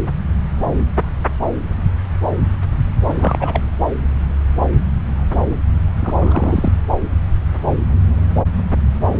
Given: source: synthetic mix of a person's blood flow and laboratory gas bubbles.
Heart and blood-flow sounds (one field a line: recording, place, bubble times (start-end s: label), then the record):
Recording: Doppler ultrasound of blood flow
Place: subclavian vein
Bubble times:
3.08-3.14 s: bubbles
3.19-3.60 s: bubbles
6.00-6.14 s: bubbles
6.18-6.73 s: bubbles
From the record:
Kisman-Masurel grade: 222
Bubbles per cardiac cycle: several, 3 to 8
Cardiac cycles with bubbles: 10 to 50%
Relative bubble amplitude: moderate (0.250 to 0.450)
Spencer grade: 2 (many but less than half of the cardiac periods contain bubble signals, singularly or in groups)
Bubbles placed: anywhere in the cardiac cycle